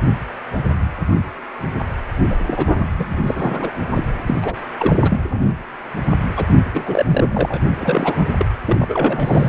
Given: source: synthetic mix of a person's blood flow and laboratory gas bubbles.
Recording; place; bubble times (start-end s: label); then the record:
Doppler ultrasound of blood flow; precordium
2.30-2.36 s: bubbles
2.46-2.54 s: bubbles
2.56-2.69 s: bubbles
2.98-3.24 s: bubbles
3.27-3.71 s: bubbles
3.95-4.06 s: bubbles
4.26-4.55 s: bubbles
4.78-4.96 s: bubbles
5.01-5.21 s: bubbles
6.36-6.47 s: bubbles
6.74-7.61 s: bubbles
7.81-8.26 s: bubbles
8.38-8.46 s: bubbles
8.66-9.49 s: bubbles
From the record:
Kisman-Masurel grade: 332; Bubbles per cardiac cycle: rolling drumbeat, 9 or more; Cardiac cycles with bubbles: 50 to 99%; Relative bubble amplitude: moderate (0.250 to 0.450); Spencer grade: 3 (all of the cardiac periods contain showers or single bubble signals, but not dominating or overriding the cardiac motion signals); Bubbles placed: anywhere in the cardiac cycle